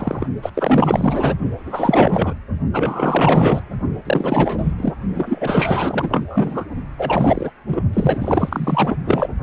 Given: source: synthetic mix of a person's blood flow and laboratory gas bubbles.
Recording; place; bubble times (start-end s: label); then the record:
Doppler ultrasound of blood flow; precordium
0.00-0.27 s: bubbles
0.42-0.51 s: bubbles
0.54-1.35 s: bubbles
1.65-2.33 s: bubbles
2.73-3.62 s: bubbles
4.05-4.75 s: bubbles
4.78-4.94 s: bubbles
5.15-6.65 s: bubbles
6.98-7.51 s: bubbles
7.66-7.82 s: bubbles
7.93-8.96 s: bubbles
9.04-9.29 s: bubbles
From the record:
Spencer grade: 4 (maximum detectable bubble signal sounding continuously throughout systole and diastole of every cardiac period, and overriding the amplitude of the normal cardiac signals); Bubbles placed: only in the low amplitude regions of the cardiac cycle